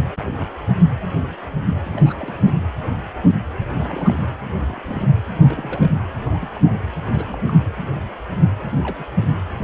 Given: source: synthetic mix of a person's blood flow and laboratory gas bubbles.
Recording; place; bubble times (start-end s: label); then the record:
Doppler ultrasound of blood flow; precordium
1.84-2.43 s: bubbles
2.47-2.53 s: bubbles
3.77-4.23 s: bubbles
4.67-5.14 s: bubbles
5.33-5.90 s: bubbles
6.18-6.49 s: bubbles
6.54-6.61 s: bubbles
6.64-6.72 s: bubbles
7.06-7.37 s: bubbles
7.46-7.54 s: bubbles
7.58-7.64 s: bubbles
8.72-8.79 s: bubbles
8.83-8.96 s: bubbles
8.99-9.08 s: bubbles
9.22-9.29 s: bubbles
9.56-9.64 s: bubbles
From the record:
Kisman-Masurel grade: 221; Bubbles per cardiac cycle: several, 3 to 8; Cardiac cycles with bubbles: 10 to 50%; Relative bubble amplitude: barely perceptible (0.100 to 0.250); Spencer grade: 2 (many but less than half of the cardiac periods contain bubble signals, singularly or in groups); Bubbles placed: anywhere in the cardiac cycle